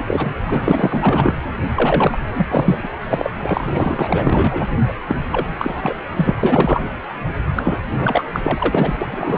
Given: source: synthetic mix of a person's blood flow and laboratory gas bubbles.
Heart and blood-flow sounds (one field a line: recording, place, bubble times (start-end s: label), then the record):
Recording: Doppler ultrasound of blood flow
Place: precordium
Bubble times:
0.00-0.04 s: bubbles
0.08-0.33 s: bubbles
0.42-1.34 s: bubbles
1.73-2.19 s: bubbles
2.25-2.89 s: bubbles
3.02-3.31 s: bubbles
3.40-4.67 s: bubbles
4.88-4.93 s: bubbles
5.08-5.16 s: bubbles
5.31-5.46 s: bubbles
5.58-5.96 s: bubbles
6.17-6.36 s: bubbles
6.43-6.83 s: bubbles
7.55-7.80 s: bubbles
7.91-8.24 s: bubbles
8.33-8.98 s: bubbles
9.01-9.38 s: bubbles
From the record:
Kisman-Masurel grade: 444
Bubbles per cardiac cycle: continuous sound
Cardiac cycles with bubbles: 100%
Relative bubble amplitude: maximal (0.775 to 0.999)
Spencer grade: 4 (maximum detectable bubble signal sounding continuously throughout systole and diastole of every cardiac period, and overriding the amplitude of the normal cardiac signals)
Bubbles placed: anywhere in the cardiac cycle